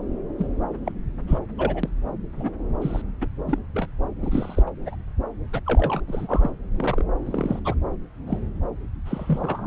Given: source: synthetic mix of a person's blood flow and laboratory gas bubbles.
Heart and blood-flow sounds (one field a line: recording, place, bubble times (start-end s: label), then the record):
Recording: Doppler ultrasound of blood flow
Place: subclavian vein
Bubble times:
0.38-0.46 s: bubbles
0.85-0.92 s: bubbles
1.27-1.39 s: bubbles
1.57-1.89 s: bubbles
2.36-2.50 s: bubbles
2.81-3.02 s: bubbles
3.21-3.27 s: bubbles
3.48-3.59 s: bubbles
3.73-3.88 s: bubbles
4.22-4.62 s: bubbles
4.67-4.71 s: bubbles
4.81-4.96 s: bubbles
5.53-5.60 s: bubbles
5.66-6.00 s: bubbles
6.07-6.50 s: bubbles
6.76-7.04 s: bubbles
7.25-7.59 s: bubbles
7.64-7.75 s: bubbles
8.27-8.39 s: bubbles
9.05-9.67 s: bubbles
From the record:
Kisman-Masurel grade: 242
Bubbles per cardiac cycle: several, 3 to 8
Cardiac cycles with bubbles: 100%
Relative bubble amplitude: moderate (0.250 to 0.450)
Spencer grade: 3 (all of the cardiac periods contain showers or single bubble signals, but not dominating or overriding the cardiac motion signals)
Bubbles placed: anywhere in the cardiac cycle